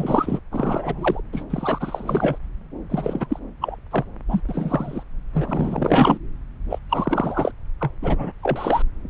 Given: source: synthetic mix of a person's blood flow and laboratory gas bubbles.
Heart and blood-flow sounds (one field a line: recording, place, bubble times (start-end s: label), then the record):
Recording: Doppler ultrasound of blood flow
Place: subclavian vein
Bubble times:
0.00-0.40 s: bubbles
0.52-1.21 s: bubbles
1.32-1.44 s: bubbles
1.50-2.38 s: bubbles
2.89-3.26 s: bubbles
3.29-3.40 s: bubbles
3.61-3.76 s: bubbles
3.91-4.04 s: bubbles
4.28-4.42 s: bubbles
4.49-5.03 s: bubbles
5.33-6.17 s: bubbles
6.70-6.79 s: bubbles
6.89-7.52 s: bubbles
7.80-7.91 s: bubbles
8.02-8.32 s: bubbles
8.42-8.82 s: bubbles
From the record:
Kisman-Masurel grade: 342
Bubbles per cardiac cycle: rolling drumbeat, 9 or more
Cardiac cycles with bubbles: 100%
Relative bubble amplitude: moderate (0.250 to 0.450)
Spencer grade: 3 (all of the cardiac periods contain showers or single bubble signals, but not dominating or overriding the cardiac motion signals)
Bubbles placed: anywhere in the cardiac cycle